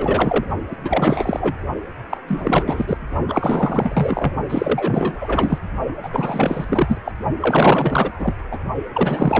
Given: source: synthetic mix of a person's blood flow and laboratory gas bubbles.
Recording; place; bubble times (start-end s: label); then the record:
Doppler ultrasound of blood flow; precordium
0.00-0.45 s: bubbles
0.70-0.76 s: bubbles
0.84-1.58 s: bubbles
2.09-2.18 s: bubbles
2.27-2.97 s: bubbles
3.27-4.33 s: bubbles
4.49-5.58 s: bubbles
6.03-6.09 s: bubbles
6.12-6.98 s: bubbles
7.05-7.12 s: bubbles
7.40-8.33 s: bubbles
8.51-8.59 s: bubbles
8.93-9.40 s: bubbles
From the record:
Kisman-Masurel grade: 444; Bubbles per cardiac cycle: continuous sound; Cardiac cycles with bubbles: 100%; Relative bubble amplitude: maximal (0.775 to 0.999); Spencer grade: 4 (maximum detectable bubble signal sounding continuously throughout systole and diastole of every cardiac period, and overriding the amplitude of the normal cardiac signals); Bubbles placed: only in the low amplitude regions of the cardiac cycle